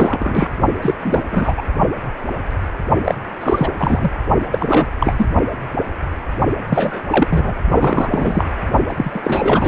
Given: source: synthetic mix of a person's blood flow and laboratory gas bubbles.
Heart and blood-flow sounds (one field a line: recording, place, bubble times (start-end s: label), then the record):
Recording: Doppler ultrasound of blood flow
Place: precordium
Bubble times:
0.00-0.50 s: bubbles
0.81-0.94 s: bubbles
0.99-1.23 s: bubbles
1.31-1.54 s: bubbles
1.56-1.63 s: bubbles
3.04-3.15 s: bubbles
3.40-3.69 s: bubbles
3.78-4.12 s: bubbles
4.52-4.88 s: bubbles
5.00-5.27 s: bubbles
6.69-7.01 s: bubbles
7.11-7.54 s: bubbles
7.69-8.44 s: bubbles
8.88-9.68 s: bubbles
From the record:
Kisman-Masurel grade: 333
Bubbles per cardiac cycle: rolling drumbeat, 9 or more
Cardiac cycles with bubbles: 50 to 99%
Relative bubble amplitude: loud (0.450 to 0.775)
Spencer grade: 3 (all of the cardiac periods contain showers or single bubble signals, but not dominating or overriding the cardiac motion signals)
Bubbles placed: only in the low amplitude regions of the cardiac cycle